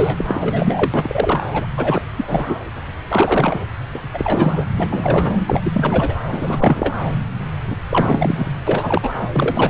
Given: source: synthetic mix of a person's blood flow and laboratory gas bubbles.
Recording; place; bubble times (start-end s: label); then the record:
Doppler ultrasound of blood flow; subclavian vein
0.00-0.25 s: bubbles
0.28-1.47 s: bubbles
1.53-1.67 s: bubbles
1.77-2.01 s: bubbles
2.16-2.44 s: bubbles
2.47-2.56 s: bubbles
3.09-3.65 s: bubbles
3.94-4.01 s: bubbles
4.14-4.65 s: bubbles
4.77-5.37 s: bubbles
5.46-5.61 s: bubbles
5.65-6.20 s: bubbles
6.32-6.96 s: bubbles
7.70-7.77 s: bubbles
7.89-8.51 s: bubbles
8.66-9.09 s: bubbles
9.21-9.27 s: bubbles
9.33-9.70 s: bubbles
From the record:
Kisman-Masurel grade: 343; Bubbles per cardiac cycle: rolling drumbeat, 9 or more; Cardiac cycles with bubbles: 100%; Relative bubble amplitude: loud (0.450 to 0.775); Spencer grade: 3 (all of the cardiac periods contain showers or single bubble signals, but not dominating or overriding the cardiac motion signals); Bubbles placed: anywhere in the cardiac cycle